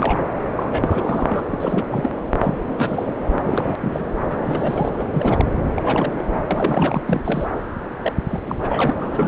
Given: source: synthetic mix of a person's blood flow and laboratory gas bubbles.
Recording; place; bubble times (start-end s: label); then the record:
Doppler ultrasound of blood flow; subclavian vein
0.00-0.26 s: bubbles
0.55-1.44 s: bubbles
1.51-1.85 s: bubbles
1.90-2.11 s: bubbles
2.42-2.57 s: bubbles
2.69-2.75 s: bubbles
2.77-3.12 s: bubbles
3.44-3.76 s: bubbles
3.81-4.05 s: bubbles
4.28-4.38 s: bubbles
4.45-4.91 s: bubbles
4.99-5.05 s: bubbles
5.13-5.46 s: bubbles
5.76-6.12 s: bubbles
6.17-6.24 s: bubbles
6.28-6.41 s: bubbles
6.51-7.02 s: bubbles
7.08-7.48 s: bubbles
8.02-8.12 s: bubbles
8.29-8.41 s: bubbles
8.46-8.96 s: bubbles
9.00-9.28 s: bubbles
From the record:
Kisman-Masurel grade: 342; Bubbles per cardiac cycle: rolling drumbeat, 9 or more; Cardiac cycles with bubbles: 100%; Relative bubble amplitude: moderate (0.250 to 0.450); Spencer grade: 3 (all of the cardiac periods contain showers or single bubble signals, but not dominating or overriding the cardiac motion signals); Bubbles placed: anywhere in the cardiac cycle